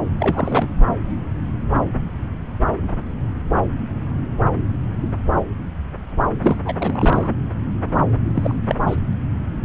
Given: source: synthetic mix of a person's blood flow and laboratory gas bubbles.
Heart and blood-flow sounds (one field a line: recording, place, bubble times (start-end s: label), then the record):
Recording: Doppler ultrasound of blood flow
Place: subclavian vein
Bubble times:
0.19-0.68 s: bubbles
6.42-6.57 s: bubbles
6.64-6.74 s: bubbles
6.78-7.30 s: bubbles
8.34-8.54 s: bubbles
8.68-8.76 s: bubbles
8.87-8.97 s: bubbles
From the record:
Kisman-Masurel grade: 223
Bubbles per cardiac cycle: several, 3 to 8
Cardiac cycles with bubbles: 10 to 50%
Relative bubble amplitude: loud (0.450 to 0.775)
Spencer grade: 2 (many but less than half of the cardiac periods contain bubble signals, singularly or in groups)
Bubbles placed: anywhere in the cardiac cycle